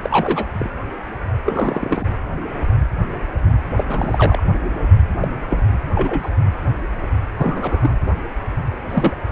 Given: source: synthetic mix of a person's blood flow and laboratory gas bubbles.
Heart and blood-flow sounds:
Doppler ultrasound of blood flow; precordium
0.02-0.49 s: bubbles
0.52-0.69 s: bubbles
1.45-2.06 s: bubbles
3.77-4.42 s: bubbles
5.20-5.34 s: bubbles
5.50-5.63 s: bubbles
5.94-6.30 s: bubbles
7.37-7.91 s: bubbles
8.88-9.16 s: bubbles
9.28-9.31 s: bubbles
From the record:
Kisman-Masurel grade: 222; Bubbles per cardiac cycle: several, 3 to 8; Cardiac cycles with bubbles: 10 to 50%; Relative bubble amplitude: moderate (0.250 to 0.450); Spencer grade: 2 (many but less than half of the cardiac periods contain bubble signals, singularly or in groups); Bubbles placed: anywhere in the cardiac cycle

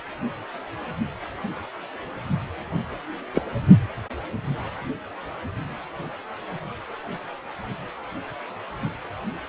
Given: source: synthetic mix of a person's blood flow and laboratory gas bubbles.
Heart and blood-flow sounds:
Doppler ultrasound of blood flow; precordium
3.35-3.42 s: bubbles
From the record:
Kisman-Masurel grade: 113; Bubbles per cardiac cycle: 1 to 2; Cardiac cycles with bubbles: 1 to 10%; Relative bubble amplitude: loud (0.450 to 0.775); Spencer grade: 1 (occasional bubble signal discernible with the cardiac motion signal, with majority of cardiac periods free of bubbles); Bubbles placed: only in the low amplitude regions of the cardiac cycle

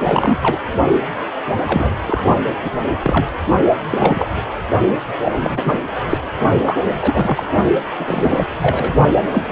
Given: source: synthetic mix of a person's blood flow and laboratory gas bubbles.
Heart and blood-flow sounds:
Doppler ultrasound of blood flow; precordium
0.00-0.38 s: bubbles
0.42-0.59 s: bubbles
1.67-1.96 s: bubbles
2.06-2.21 s: bubbles
2.62-2.71 s: bubbles
3.02-3.25 s: bubbles
3.91-4.28 s: bubbles
5.25-5.81 s: bubbles
6.09-6.17 s: bubbles
6.62-6.78 s: bubbles
7.00-7.44 s: bubbles
7.97-8.47 s: bubbles
8.62-8.93 s: bubbles
9.12-9.22 s: bubbles
9.31-9.42 s: bubbles
9.47-9.51 s: bubbles
From the record:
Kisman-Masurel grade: 243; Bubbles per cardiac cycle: several, 3 to 8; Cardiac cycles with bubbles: 100%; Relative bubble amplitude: loud (0.450 to 0.775); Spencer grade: 3 (all of the cardiac periods contain showers or single bubble signals, but not dominating or overriding the cardiac motion signals); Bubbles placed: only in the low amplitude regions of the cardiac cycle

